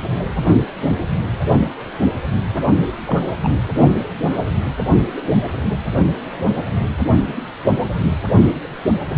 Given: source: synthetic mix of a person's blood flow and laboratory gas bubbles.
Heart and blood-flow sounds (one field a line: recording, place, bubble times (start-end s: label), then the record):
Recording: Doppler ultrasound of blood flow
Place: precordium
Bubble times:
3.07-3.30 s: bubbles
3.43-3.49 s: bubbles
From the record:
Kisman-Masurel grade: 222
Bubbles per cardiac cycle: several, 3 to 8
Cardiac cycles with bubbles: 10 to 50%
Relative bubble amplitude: moderate (0.250 to 0.450)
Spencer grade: 2 (many but less than half of the cardiac periods contain bubble signals, singularly or in groups)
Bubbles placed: only in the low amplitude regions of the cardiac cycle